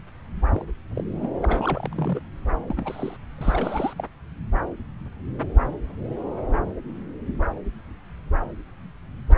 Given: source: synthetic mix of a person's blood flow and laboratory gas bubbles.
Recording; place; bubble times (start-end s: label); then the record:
Doppler ultrasound of blood flow; subclavian vein
0.54-0.63 s: bubbles
0.97-1.01 s: bubbles
1.16-1.28 s: bubbles
1.42-2.20 s: bubbles
2.68-3.17 s: bubbles
3.38-3.93 s: bubbles
3.98-4.07 s: bubbles
From the record:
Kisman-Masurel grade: 221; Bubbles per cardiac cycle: several, 3 to 8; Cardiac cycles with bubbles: 10 to 50%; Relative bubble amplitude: barely perceptible (0.100 to 0.250); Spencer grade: 2 (many but less than half of the cardiac periods contain bubble signals, singularly or in groups); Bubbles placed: anywhere in the cardiac cycle